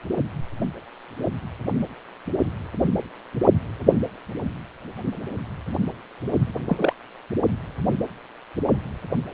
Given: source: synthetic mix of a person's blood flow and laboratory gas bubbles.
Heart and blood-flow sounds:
Doppler ultrasound of blood flow; precordium
6.66-6.93 s: bubbles
From the record:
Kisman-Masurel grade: 112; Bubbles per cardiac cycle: 1 to 2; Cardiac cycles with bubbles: 1 to 10%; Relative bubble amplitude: moderate (0.250 to 0.450); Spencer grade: 1 (occasional bubble signal discernible with the cardiac motion signal, with majority of cardiac periods free of bubbles); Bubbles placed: only in the low amplitude regions of the cardiac cycle

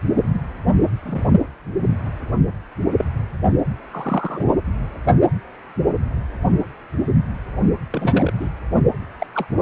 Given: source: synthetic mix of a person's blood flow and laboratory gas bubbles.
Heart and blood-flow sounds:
Doppler ultrasound of blood flow; precordium
0.15-0.30 s: bubbles
0.33-0.43 s: bubbles
1.02-1.24 s: bubbles
2.98-3.05 s: bubbles
3.90-4.49 s: bubbles
7.92-8.31 s: bubbles
8.40-8.51 s: bubbles
9.19-9.27 s: bubbles
9.34-9.46 s: bubbles
9.59-9.62 s: bubbles
From the record:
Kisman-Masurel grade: 232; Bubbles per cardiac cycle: several, 3 to 8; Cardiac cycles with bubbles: 50 to 99%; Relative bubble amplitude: moderate (0.250 to 0.450); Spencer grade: 3 (all of the cardiac periods contain showers or single bubble signals, but not dominating or overriding the cardiac motion signals); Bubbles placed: only in the low amplitude regions of the cardiac cycle

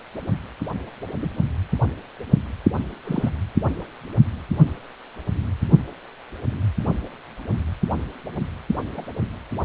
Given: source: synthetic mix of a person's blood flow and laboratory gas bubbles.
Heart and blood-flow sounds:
Doppler ultrasound of blood flow; precordium
1.19-1.29 s: bubbles
3.05-3.29 s: bubbles
8.96-9.04 s: bubbles
From the record:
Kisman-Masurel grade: 122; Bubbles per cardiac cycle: 1 to 2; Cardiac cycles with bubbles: 10 to 50%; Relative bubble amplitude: moderate (0.250 to 0.450); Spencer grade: 2 (many but less than half of the cardiac periods contain bubble signals, singularly or in groups); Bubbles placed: only in the low amplitude regions of the cardiac cycle

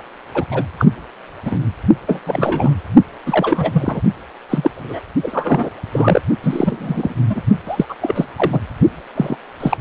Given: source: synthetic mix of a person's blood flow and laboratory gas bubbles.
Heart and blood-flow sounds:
Doppler ultrasound of blood flow; precordium
0.34-0.45 s: bubbles
0.51-0.62 s: bubbles
0.78-0.85 s: bubbles
1.45-1.59 s: bubbles
2.07-2.21 s: bubbles
2.26-2.75 s: bubbles
3.25-4.01 s: bubbles
4.50-4.71 s: bubbles
4.75-5.04 s: bubbles
5.22-5.70 s: bubbles
5.92-6.21 s: bubbles
6.42-7.15 s: bubbles
7.29-7.42 s: bubbles
7.67-7.86 s: bubbles
7.89-7.96 s: bubbles
8.01-8.27 s: bubbles
8.36-8.60 s: bubbles
9.15-9.36 s: bubbles
9.60-9.77 s: bubbles
From the record:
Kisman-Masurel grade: 243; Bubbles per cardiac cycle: several, 3 to 8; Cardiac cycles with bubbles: 100%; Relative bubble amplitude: loud (0.450 to 0.775); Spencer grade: 3 (all of the cardiac periods contain showers or single bubble signals, but not dominating or overriding the cardiac motion signals); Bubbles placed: only in the low amplitude regions of the cardiac cycle

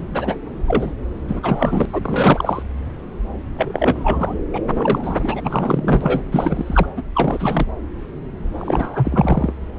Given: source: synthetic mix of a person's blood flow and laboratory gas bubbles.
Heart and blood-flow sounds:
Doppler ultrasound of blood flow; subclavian vein
0.00-0.05 s: bubbles
0.10-0.37 s: bubbles
0.67-0.93 s: bubbles
1.27-1.85 s: bubbles
1.92-2.62 s: bubbles
3.58-4.37 s: bubbles
4.52-4.61 s: bubbles
4.68-5.41 s: bubbles
5.44-6.22 s: bubbles
6.31-6.87 s: bubbles
6.97-7.03 s: bubbles
7.15-7.67 s: bubbles
8.58-9.53 s: bubbles
From the record:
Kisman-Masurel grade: 333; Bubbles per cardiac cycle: rolling drumbeat, 9 or more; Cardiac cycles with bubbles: 50 to 99%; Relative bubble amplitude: loud (0.450 to 0.775); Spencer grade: 3 (all of the cardiac periods contain showers or single bubble signals, but not dominating or overriding the cardiac motion signals); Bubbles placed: anywhere in the cardiac cycle

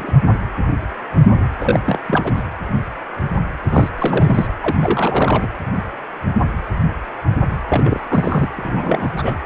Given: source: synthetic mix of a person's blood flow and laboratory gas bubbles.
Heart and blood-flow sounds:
Doppler ultrasound of blood flow; precordium
0.00-0.13 s: bubbles
1.60-1.79 s: bubbles
1.84-1.98 s: bubbles
2.07-2.32 s: bubbles
2.36-2.42 s: bubbles
3.71-3.90 s: bubbles
3.98-4.48 s: bubbles
4.61-4.77 s: bubbles
4.82-5.47 s: bubbles
7.69-8.00 s: bubbles
8.08-8.48 s: bubbles
8.56-9.35 s: bubbles
From the record:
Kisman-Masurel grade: 332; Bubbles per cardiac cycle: rolling drumbeat, 9 or more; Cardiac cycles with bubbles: 50 to 99%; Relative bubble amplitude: moderate (0.250 to 0.450); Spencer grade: 3 (all of the cardiac periods contain showers or single bubble signals, but not dominating or overriding the cardiac motion signals); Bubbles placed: anywhere in the cardiac cycle

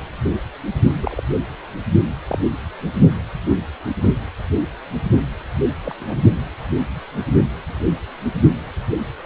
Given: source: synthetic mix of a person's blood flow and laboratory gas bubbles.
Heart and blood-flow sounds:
Doppler ultrasound of blood flow; precordium
1.00-1.23 s: bubbles
2.27-2.39 s: bubbles
5.84-5.95 s: bubbles
5.99-6.22 s: bubbles
From the record:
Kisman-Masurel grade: 122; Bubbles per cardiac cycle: 1 to 2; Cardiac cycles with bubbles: 10 to 50%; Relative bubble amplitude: moderate (0.250 to 0.450); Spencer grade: 2 (many but less than half of the cardiac periods contain bubble signals, singularly or in groups); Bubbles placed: only in the low amplitude regions of the cardiac cycle

